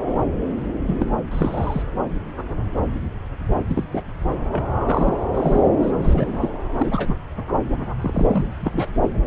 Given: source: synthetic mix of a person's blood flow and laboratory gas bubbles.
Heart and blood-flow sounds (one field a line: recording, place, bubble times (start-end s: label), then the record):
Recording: Doppler ultrasound of blood flow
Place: subclavian vein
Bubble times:
0.87-1.06 s: bubbles
1.31-1.82 s: bubbles
3.67-3.84 s: bubbles
3.92-4.03 s: bubbles
4.51-4.64 s: bubbles
4.88-5.13 s: bubbles
5.33-5.62 s: bubbles
5.82-5.92 s: bubbles
5.98-6.50 s: bubbles
6.78-7.15 s: bubbles
8.01-8.46 s: bubbles
8.59-8.88 s: bubbles
From the record:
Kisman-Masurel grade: 232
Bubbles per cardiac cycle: several, 3 to 8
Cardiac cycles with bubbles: 50 to 99%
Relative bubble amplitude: moderate (0.250 to 0.450)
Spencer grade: 3 (all of the cardiac periods contain showers or single bubble signals, but not dominating or overriding the cardiac motion signals)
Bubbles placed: anywhere in the cardiac cycle